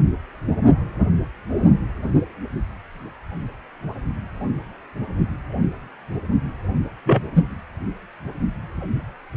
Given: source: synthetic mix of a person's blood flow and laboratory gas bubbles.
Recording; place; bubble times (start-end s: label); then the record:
Doppler ultrasound of blood flow; precordium
7.05-7.21 s: bubbles
7.36-7.44 s: bubbles
From the record:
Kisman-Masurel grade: 113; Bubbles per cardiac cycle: 1 to 2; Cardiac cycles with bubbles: 1 to 10%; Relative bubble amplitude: loud (0.450 to 0.775); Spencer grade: 1 (occasional bubble signal discernible with the cardiac motion signal, with majority of cardiac periods free of bubbles); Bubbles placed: only in the low amplitude regions of the cardiac cycle